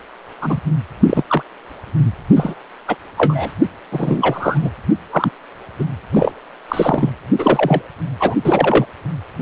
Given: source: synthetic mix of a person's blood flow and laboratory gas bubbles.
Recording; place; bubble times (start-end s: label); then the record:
Doppler ultrasound of blood flow; precordium
0.41-0.60 s: bubbles
1.01-1.23 s: bubbles
1.28-1.43 s: bubbles
2.35-2.55 s: bubbles
2.88-2.96 s: bubbles
3.17-3.49 s: bubbles
3.92-4.58 s: bubbles
4.61-4.70 s: bubbles
5.12-5.31 s: bubbles
5.79-5.84 s: bubbles
6.12-6.32 s: bubbles
6.68-7.09 s: bubbles
7.38-7.82 s: bubbles
8.20-8.35 s: bubbles
8.44-8.86 s: bubbles
From the record:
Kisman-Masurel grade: 243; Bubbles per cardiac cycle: several, 3 to 8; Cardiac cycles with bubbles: 100%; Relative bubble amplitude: loud (0.450 to 0.775); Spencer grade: 3 (all of the cardiac periods contain showers or single bubble signals, but not dominating or overriding the cardiac motion signals); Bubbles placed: anywhere in the cardiac cycle